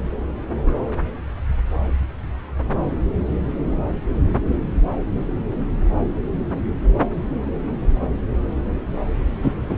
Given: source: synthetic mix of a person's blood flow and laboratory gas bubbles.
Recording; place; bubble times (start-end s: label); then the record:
Doppler ultrasound of blood flow; subclavian vein
9.42-9.54 s: bubbles
9.68-9.77 s: bubbles
From the record:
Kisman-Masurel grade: 113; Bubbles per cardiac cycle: 1 to 2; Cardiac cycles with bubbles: 1 to 10%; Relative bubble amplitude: loud (0.450 to 0.775); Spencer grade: 1 (occasional bubble signal discernible with the cardiac motion signal, with majority of cardiac periods free of bubbles); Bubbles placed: anywhere in the cardiac cycle